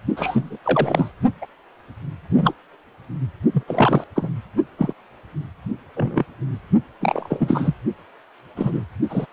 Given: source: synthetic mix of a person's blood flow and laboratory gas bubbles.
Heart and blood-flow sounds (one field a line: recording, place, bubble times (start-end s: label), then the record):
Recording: Doppler ultrasound of blood flow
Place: precordium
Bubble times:
0.16-0.58 s: bubbles
0.64-1.11 s: bubbles
1.41-1.46 s: bubbles
2.33-2.54 s: bubbles
3.52-3.63 s: bubbles
3.67-4.04 s: bubbles
4.15-4.30 s: bubbles
4.78-4.93 s: bubbles
5.96-6.25 s: bubbles
7.00-7.75 s: bubbles
8.56-8.84 s: bubbles
9.10-9.27 s: bubbles
From the record:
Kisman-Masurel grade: 243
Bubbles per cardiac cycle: several, 3 to 8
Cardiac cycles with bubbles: 100%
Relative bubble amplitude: loud (0.450 to 0.775)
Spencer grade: 3 (all of the cardiac periods contain showers or single bubble signals, but not dominating or overriding the cardiac motion signals)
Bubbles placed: only in the low amplitude regions of the cardiac cycle